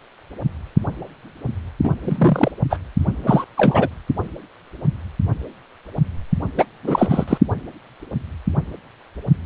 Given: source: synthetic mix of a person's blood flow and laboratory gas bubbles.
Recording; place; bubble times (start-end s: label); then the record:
Doppler ultrasound of blood flow; precordium
1.83-1.91 s: bubbles
2.02-2.51 s: bubbles
2.70-2.78 s: bubbles
3.23-3.44 s: bubbles
3.57-3.89 s: bubbles
6.57-6.65 s: bubbles
6.84-7.25 s: bubbles
7.28-7.38 s: bubbles
From the record:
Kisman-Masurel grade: 223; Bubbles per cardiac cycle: several, 3 to 8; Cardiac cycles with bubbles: 10 to 50%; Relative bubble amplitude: loud (0.450 to 0.775); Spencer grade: 2 (many but less than half of the cardiac periods contain bubble signals, singularly or in groups); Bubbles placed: anywhere in the cardiac cycle